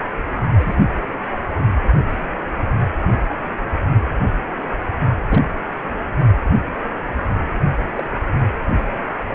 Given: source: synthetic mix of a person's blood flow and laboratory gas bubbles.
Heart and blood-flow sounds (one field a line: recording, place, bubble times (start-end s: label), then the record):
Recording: Doppler ultrasound of blood flow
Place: precordium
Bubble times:
0.58-0.76 s: bubbles
5.28-5.42 s: bubbles
7.95-8.04 s: bubbles
From the record:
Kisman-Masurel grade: 121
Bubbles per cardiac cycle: 1 to 2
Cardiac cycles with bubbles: 10 to 50%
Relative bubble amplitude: barely perceptible (0.100 to 0.250)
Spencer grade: 2 (many but less than half of the cardiac periods contain bubble signals, singularly or in groups)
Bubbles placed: only in the low amplitude regions of the cardiac cycle